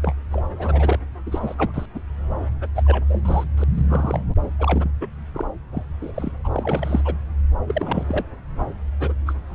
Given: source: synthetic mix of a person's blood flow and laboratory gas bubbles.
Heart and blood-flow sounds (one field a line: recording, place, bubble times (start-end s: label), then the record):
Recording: Doppler ultrasound of blood flow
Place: subclavian vein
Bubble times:
0.02-0.13 s: bubbles
0.32-0.44 s: bubbles
0.58-0.99 s: bubbles
1.26-1.54 s: bubbles
1.57-1.86 s: bubbles
1.94-2.00 s: bubbles
2.60-2.68 s: bubbles
2.75-3.05 s: bubbles
3.10-3.21 s: bubbles
3.25-3.44 s: bubbles
3.57-3.64 s: bubbles
3.74-3.87 s: bubbles
3.90-4.23 s: bubbles
4.59-4.91 s: bubbles
5.00-5.07 s: bubbles
5.33-5.48 s: bubbles
5.72-5.83 s: bubbles
6.00-6.32 s: bubbles
6.43-6.49 s: bubbles
6.52-7.15 s: bubbles
7.67-8.04 s: bubbles
8.08-8.25 s: bubbles
8.99-9.13 s: bubbles
9.26-9.34 s: bubbles
From the record:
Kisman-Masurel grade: 242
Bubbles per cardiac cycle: several, 3 to 8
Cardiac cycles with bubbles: 100%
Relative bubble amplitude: moderate (0.250 to 0.450)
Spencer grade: 3 (all of the cardiac periods contain showers or single bubble signals, but not dominating or overriding the cardiac motion signals)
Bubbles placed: anywhere in the cardiac cycle